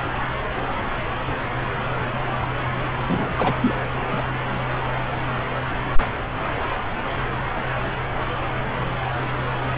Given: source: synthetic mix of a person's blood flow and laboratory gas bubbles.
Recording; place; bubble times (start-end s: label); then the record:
Doppler ultrasound of blood flow; subclavian vein
3.08-3.32 s: bubbles
3.37-3.53 s: bubbles
3.60-3.77 s: bubbles
4.10-4.22 s: bubbles
From the record:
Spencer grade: 1 (occasional bubble signal discernible with the cardiac motion signal, with majority of cardiac periods free of bubbles); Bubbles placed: anywhere in the cardiac cycle